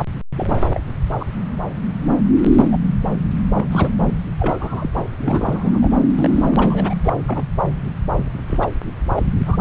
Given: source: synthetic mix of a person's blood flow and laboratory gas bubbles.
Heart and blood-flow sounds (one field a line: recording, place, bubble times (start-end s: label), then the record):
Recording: Doppler ultrasound of blood flow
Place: subclavian vein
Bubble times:
0.36-0.66 s: bubbles
0.72-0.80 s: bubbles
1.20-1.25 s: bubbles
2.39-2.77 s: bubbles
3.53-3.67 s: bubbles
3.71-3.91 s: bubbles
4.39-5.03 s: bubbles
5.20-5.79 s: bubbles
5.81-5.88 s: bubbles
6.15-6.94 s: bubbles
7.03-7.13 s: bubbles
7.26-7.43 s: bubbles
8.49-8.69 s: bubbles
9.15-9.26 s: bubbles
9.46-9.61 s: bubbles
From the record:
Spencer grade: 3 (all of the cardiac periods contain showers or single bubble signals, but not dominating or overriding the cardiac motion signals)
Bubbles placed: anywhere in the cardiac cycle